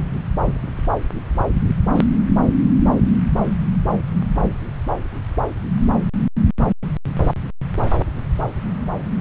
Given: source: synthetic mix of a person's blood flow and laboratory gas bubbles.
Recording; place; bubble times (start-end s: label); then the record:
Doppler ultrasound of blood flow; subclavian vein
1.95-2.05 s: bubbles
From the record:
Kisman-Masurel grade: 122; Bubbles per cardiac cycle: 1 to 2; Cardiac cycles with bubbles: 10 to 50%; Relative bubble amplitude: moderate (0.250 to 0.450); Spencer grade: 2 (many but less than half of the cardiac periods contain bubble signals, singularly or in groups); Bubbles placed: anywhere in the cardiac cycle